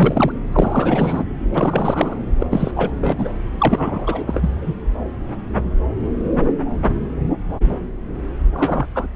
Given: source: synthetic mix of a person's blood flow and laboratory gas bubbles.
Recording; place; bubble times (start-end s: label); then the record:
Doppler ultrasound of blood flow; subclavian vein
0.00-0.32 s: bubbles
0.52-1.25 s: bubbles
1.54-2.15 s: bubbles
2.38-2.46 s: bubbles
2.50-2.71 s: bubbles
2.75-3.29 s: bubbles
3.58-4.50 s: bubbles
4.62-4.74 s: bubbles
8.54-8.86 s: bubbles
8.95-9.08 s: bubbles
From the record:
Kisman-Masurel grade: 333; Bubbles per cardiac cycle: rolling drumbeat, 9 or more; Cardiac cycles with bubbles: 50 to 99%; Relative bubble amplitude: loud (0.450 to 0.775); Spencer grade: 3 (all of the cardiac periods contain showers or single bubble signals, but not dominating or overriding the cardiac motion signals); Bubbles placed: anywhere in the cardiac cycle